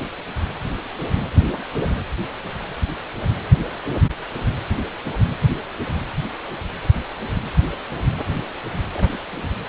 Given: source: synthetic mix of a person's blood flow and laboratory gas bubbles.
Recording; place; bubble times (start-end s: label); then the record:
Doppler ultrasound of blood flow; precordium
8.92-9.19 s: bubbles
9.32-9.51 s: bubbles
From the record:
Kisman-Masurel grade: 211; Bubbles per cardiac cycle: several, 3 to 8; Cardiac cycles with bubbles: 1 to 10%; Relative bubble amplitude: barely perceptible (0.100 to 0.250); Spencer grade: 1 (occasional bubble signal discernible with the cardiac motion signal, with majority of cardiac periods free of bubbles); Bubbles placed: anywhere in the cardiac cycle